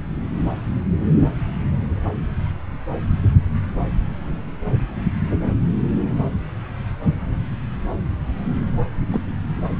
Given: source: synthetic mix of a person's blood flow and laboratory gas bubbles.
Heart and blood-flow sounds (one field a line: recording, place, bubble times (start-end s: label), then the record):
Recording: Doppler ultrasound of blood flow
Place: subclavian vein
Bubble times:
9.12-9.21 s: bubbles
From the record:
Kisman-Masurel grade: 112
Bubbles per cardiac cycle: 1 to 2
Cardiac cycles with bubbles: 1 to 10%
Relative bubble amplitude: moderate (0.250 to 0.450)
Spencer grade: 1 (occasional bubble signal discernible with the cardiac motion signal, with majority of cardiac periods free of bubbles)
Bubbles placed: anywhere in the cardiac cycle